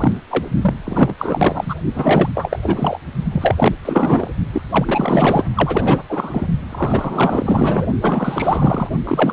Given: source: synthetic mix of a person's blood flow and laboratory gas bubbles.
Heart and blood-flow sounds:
Doppler ultrasound of blood flow; precordium
0.00-0.12 s: bubbles
0.30-0.45 s: bubbles
0.61-0.74 s: bubbles
0.84-1.15 s: bubbles
1.18-1.75 s: bubbles
1.94-2.29 s: bubbles
2.34-2.59 s: bubbles
2.63-2.99 s: bubbles
3.13-3.25 s: bubbles
3.32-3.74 s: bubbles
3.85-4.28 s: bubbles
4.52-4.62 s: bubbles
4.72-5.44 s: bubbles
5.55-6.03 s: bubbles
6.09-6.47 s: bubbles
6.69-7.87 s: bubbles
8.02-8.89 s: bubbles
9.04-9.33 s: bubbles
From the record:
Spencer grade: 4 (maximum detectable bubble signal sounding continuously throughout systole and diastole of every cardiac period, and overriding the amplitude of the normal cardiac signals); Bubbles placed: only in the low amplitude regions of the cardiac cycle

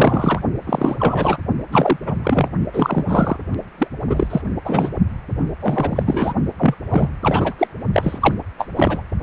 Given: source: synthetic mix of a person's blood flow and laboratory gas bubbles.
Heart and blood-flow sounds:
Doppler ultrasound of blood flow; precordium
0.00-0.40 s: bubbles
0.66-1.38 s: bubbles
1.71-1.97 s: bubbles
2.06-2.16 s: bubbles
2.23-2.49 s: bubbles
2.73-3.04 s: bubbles
3.07-3.36 s: bubbles
3.78-3.87 s: bubbles
4.10-4.27 s: bubbles
4.30-4.42 s: bubbles
4.65-4.90 s: bubbles
5.60-6.03 s: bubbles
6.06-6.34 s: bubbles
6.58-6.75 s: bubbles
6.89-7.10 s: bubbles
7.21-7.67 s: bubbles
7.93-8.18 s: bubbles
8.21-8.33 s: bubbles
8.58-8.67 s: bubbles
8.75-9.01 s: bubbles
From the record:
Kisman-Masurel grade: 343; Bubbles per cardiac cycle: rolling drumbeat, 9 or more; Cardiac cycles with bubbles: 100%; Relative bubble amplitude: loud (0.450 to 0.775); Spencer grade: 3 (all of the cardiac periods contain showers or single bubble signals, but not dominating or overriding the cardiac motion signals); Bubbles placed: only in the low amplitude regions of the cardiac cycle

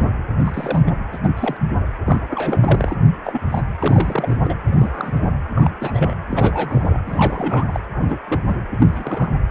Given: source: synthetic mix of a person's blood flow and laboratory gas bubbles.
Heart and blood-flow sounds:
Doppler ultrasound of blood flow; precordium
0.00-0.08 s: bubbles
0.41-0.81 s: bubbles
0.86-0.90 s: bubbles
1.12-1.19 s: bubbles
1.24-1.29 s: bubbles
1.36-1.57 s: bubbles
2.05-2.21 s: bubbles
2.31-2.95 s: bubbles
3.24-3.40 s: bubbles
3.49-3.62 s: bubbles
3.79-4.36 s: bubbles
4.44-4.55 s: bubbles
4.67-5.21 s: bubbles
5.54-5.70 s: bubbles
5.80-6.14 s: bubbles
6.31-6.97 s: bubbles
7.06-7.67 s: bubbles
7.72-7.80 s: bubbles
7.94-8.21 s: bubbles
8.28-8.40 s: bubbles
8.47-8.54 s: bubbles
8.77-9.31 s: bubbles
From the record:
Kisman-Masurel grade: 232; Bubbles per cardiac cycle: several, 3 to 8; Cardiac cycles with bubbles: 50 to 99%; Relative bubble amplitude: moderate (0.250 to 0.450); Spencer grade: 3 (all of the cardiac periods contain showers or single bubble signals, but not dominating or overriding the cardiac motion signals); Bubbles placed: anywhere in the cardiac cycle

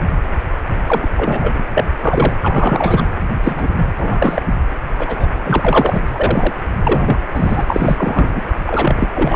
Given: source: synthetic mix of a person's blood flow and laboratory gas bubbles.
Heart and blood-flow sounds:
Doppler ultrasound of blood flow; precordium
0.86-1.07 s: bubbles
1.17-1.53 s: bubbles
1.58-1.64 s: bubbles
1.74-1.85 s: bubbles
2.02-2.33 s: bubbles
2.41-3.04 s: bubbles
3.40-3.68 s: bubbles
3.95-4.42 s: bubbles
4.98-5.27 s: bubbles
5.43-6.02 s: bubbles
6.07-6.09 s: bubbles
6.15-6.52 s: bubbles
6.83-7.17 s: bubbles
7.33-7.64 s: bubbles
7.67-8.41 s: bubbles
8.66-9.09 s: bubbles
9.14-9.36 s: bubbles
From the record:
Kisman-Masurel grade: 233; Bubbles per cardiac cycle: several, 3 to 8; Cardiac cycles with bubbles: 50 to 99%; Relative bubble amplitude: loud (0.450 to 0.775); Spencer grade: 3 (all of the cardiac periods contain showers or single bubble signals, but not dominating or overriding the cardiac motion signals); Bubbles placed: anywhere in the cardiac cycle

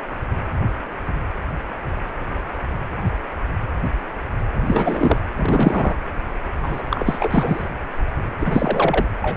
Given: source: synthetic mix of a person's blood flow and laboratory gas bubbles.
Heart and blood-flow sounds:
Doppler ultrasound of blood flow; precordium
4.55-5.17 s: bubbles
5.36-5.96 s: bubbles
6.62-6.83 s: bubbles
6.90-7.67 s: bubbles
8.39-9.05 s: bubbles
9.21-9.37 s: bubbles
From the record:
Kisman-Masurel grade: 333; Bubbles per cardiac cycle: rolling drumbeat, 9 or more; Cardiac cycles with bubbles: 50 to 99%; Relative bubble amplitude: loud (0.450 to 0.775); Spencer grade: 3 (all of the cardiac periods contain showers or single bubble signals, but not dominating or overriding the cardiac motion signals); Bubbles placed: anywhere in the cardiac cycle

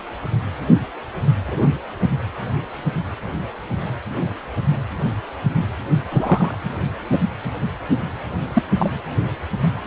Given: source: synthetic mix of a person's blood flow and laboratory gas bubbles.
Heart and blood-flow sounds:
Doppler ultrasound of blood flow; precordium
1.47-1.69 s: bubbles
6.11-6.55 s: bubbles
7.12-7.18 s: bubbles
8.53-8.62 s: bubbles
8.79-8.90 s: bubbles
From the record:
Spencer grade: 2 (many but less than half of the cardiac periods contain bubble signals, singularly or in groups); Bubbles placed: anywhere in the cardiac cycle

